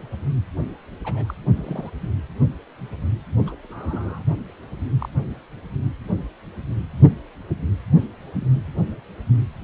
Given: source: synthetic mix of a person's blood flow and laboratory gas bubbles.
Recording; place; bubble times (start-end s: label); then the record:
Doppler ultrasound of blood flow; precordium
1.04-1.34 s: bubbles
1.55-1.90 s: bubbles
3.46-3.55 s: bubbles
3.63-4.22 s: bubbles
4.99-5.08 s: bubbles
8.34-8.46 s: bubbles
From the record:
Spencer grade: 2 (many but less than half of the cardiac periods contain bubble signals, singularly or in groups); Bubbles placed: only in the low amplitude regions of the cardiac cycle